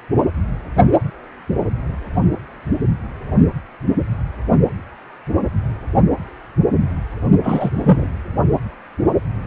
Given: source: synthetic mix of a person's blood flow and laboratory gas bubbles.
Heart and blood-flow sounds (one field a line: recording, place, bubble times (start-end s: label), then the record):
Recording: Doppler ultrasound of blood flow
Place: precordium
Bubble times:
7.43-7.71 s: bubbles
7.76-8.07 s: bubbles
From the record:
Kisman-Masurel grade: 213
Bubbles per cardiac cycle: several, 3 to 8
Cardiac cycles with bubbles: 1 to 10%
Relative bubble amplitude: loud (0.450 to 0.775)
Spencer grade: 1 (occasional bubble signal discernible with the cardiac motion signal, with majority of cardiac periods free of bubbles)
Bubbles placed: only in the low amplitude regions of the cardiac cycle